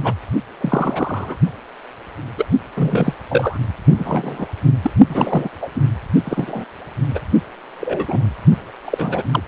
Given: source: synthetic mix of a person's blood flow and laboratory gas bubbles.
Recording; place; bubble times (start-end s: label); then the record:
Doppler ultrasound of blood flow; precordium
0.04-0.13 s: bubbles
0.60-1.36 s: bubbles
2.37-2.46 s: bubbles
2.77-3.13 s: bubbles
3.28-3.58 s: bubbles
3.98-4.46 s: bubbles
4.82-4.91 s: bubbles
5.08-5.49 s: bubbles
5.61-5.70 s: bubbles
5.75-5.82 s: bubbles
6.24-6.65 s: bubbles
7.15-7.20 s: bubbles
7.80-8.22 s: bubbles
8.85-9.23 s: bubbles
9.33-9.43 s: bubbles
From the record:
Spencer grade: 3 (all of the cardiac periods contain showers or single bubble signals, but not dominating or overriding the cardiac motion signals); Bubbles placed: only in the low amplitude regions of the cardiac cycle